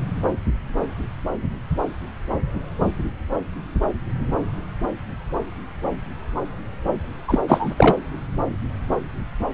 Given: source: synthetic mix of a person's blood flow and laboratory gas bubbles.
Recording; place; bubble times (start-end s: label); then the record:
Doppler ultrasound of blood flow; subclavian vein
7.27-7.40 s: bubbles
7.48-7.95 s: bubbles
From the record:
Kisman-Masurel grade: 213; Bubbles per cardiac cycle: several, 3 to 8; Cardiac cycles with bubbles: 1 to 10%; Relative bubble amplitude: loud (0.450 to 0.775); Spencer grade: 1 (occasional bubble signal discernible with the cardiac motion signal, with majority of cardiac periods free of bubbles); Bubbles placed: anywhere in the cardiac cycle